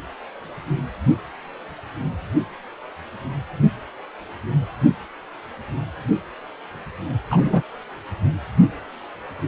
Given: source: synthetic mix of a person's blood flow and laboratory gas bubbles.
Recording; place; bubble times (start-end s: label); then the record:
Doppler ultrasound of blood flow; precordium
7.30-7.63 s: bubbles
From the record:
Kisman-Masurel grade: 113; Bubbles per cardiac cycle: 1 to 2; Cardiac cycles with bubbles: 1 to 10%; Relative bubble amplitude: loud (0.450 to 0.775); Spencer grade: 1 (occasional bubble signal discernible with the cardiac motion signal, with majority of cardiac periods free of bubbles); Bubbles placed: anywhere in the cardiac cycle